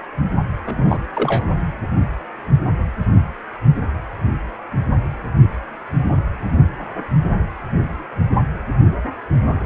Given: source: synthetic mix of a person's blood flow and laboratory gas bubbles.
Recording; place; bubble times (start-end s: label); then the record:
Doppler ultrasound of blood flow; precordium
0.66-0.99 s: bubbles
1.13-1.46 s: bubbles
From the record:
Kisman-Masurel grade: 222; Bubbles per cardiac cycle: several, 3 to 8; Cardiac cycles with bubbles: 10 to 50%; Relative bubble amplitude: moderate (0.250 to 0.450); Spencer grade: 2 (many but less than half of the cardiac periods contain bubble signals, singularly or in groups); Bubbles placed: anywhere in the cardiac cycle